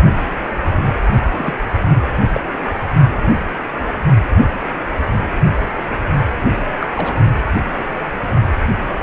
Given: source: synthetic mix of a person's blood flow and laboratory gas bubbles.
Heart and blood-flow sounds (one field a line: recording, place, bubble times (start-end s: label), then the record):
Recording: Doppler ultrasound of blood flow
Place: precordium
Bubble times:
1.30-1.54 s: bubbles
2.34-2.41 s: bubbles
6.80-6.88 s: bubbles
6.96-7.14 s: bubbles
From the record:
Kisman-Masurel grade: 122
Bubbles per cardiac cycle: 1 to 2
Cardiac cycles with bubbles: 10 to 50%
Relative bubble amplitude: moderate (0.250 to 0.450)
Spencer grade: 2 (many but less than half of the cardiac periods contain bubble signals, singularly or in groups)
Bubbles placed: only in the low amplitude regions of the cardiac cycle